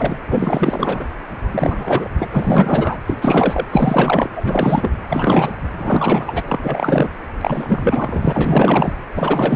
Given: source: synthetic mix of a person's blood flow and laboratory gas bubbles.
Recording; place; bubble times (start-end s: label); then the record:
Doppler ultrasound of blood flow; precordium
0.00-0.17 s: bubbles
0.27-1.04 s: bubbles
1.51-2.09 s: bubbles
2.18-2.27 s: bubbles
2.31-2.98 s: bubbles
3.06-3.17 s: bubbles
3.21-3.66 s: bubbles
3.71-4.29 s: bubbles
4.36-4.91 s: bubbles
5.08-5.52 s: bubbles
5.78-6.42 s: bubbles
6.45-7.09 s: bubbles
7.41-8.93 s: bubbles
9.15-9.56 s: bubbles
From the record:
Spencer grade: 4 (maximum detectable bubble signal sounding continuously throughout systole and diastole of every cardiac period, and overriding the amplitude of the normal cardiac signals); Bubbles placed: anywhere in the cardiac cycle